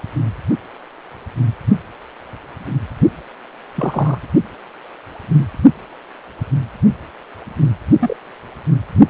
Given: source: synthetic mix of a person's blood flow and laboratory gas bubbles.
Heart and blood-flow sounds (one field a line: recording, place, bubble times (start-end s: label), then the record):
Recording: Doppler ultrasound of blood flow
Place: precordium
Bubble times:
3.75-4.18 s: bubbles
5.37-5.45 s: bubbles
7.99-8.17 s: bubbles
From the record:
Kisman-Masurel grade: 122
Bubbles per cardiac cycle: 1 to 2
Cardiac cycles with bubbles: 10 to 50%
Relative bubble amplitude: moderate (0.250 to 0.450)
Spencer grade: 2 (many but less than half of the cardiac periods contain bubble signals, singularly or in groups)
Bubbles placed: only in the low amplitude regions of the cardiac cycle